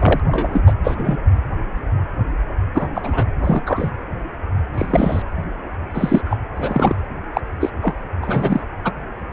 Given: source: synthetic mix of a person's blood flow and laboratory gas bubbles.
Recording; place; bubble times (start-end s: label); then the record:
Doppler ultrasound of blood flow; precordium
0.00-0.20 s: bubbles
0.26-0.61 s: bubbles
0.67-0.73 s: bubbles
0.83-1.17 s: bubbles
2.74-2.88 s: bubbles
2.94-3.24 s: bubbles
3.44-3.63 s: bubbles
3.66-3.90 s: bubbles
4.74-5.23 s: bubbles
5.94-6.21 s: bubbles
6.24-6.37 s: bubbles
6.56-6.96 s: bubbles
7.33-7.41 s: bubbles
7.60-7.70 s: bubbles
7.82-7.95 s: bubbles
8.21-8.63 s: bubbles
8.84-8.92 s: bubbles
From the record:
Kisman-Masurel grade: 233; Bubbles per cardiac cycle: several, 3 to 8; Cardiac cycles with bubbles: 50 to 99%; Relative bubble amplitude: loud (0.450 to 0.775); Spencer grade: 3 (all of the cardiac periods contain showers or single bubble signals, but not dominating or overriding the cardiac motion signals); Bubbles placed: anywhere in the cardiac cycle